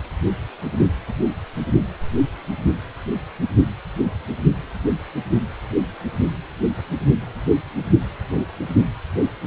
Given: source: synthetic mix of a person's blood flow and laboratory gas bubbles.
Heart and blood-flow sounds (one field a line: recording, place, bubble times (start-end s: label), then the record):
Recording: Doppler ultrasound of blood flow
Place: precordium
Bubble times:
no bubbles
From the record:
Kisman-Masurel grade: 000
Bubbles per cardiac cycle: 0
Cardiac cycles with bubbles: 0%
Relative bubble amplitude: no bubbles discernible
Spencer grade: 0 (complete lack of bubble signals)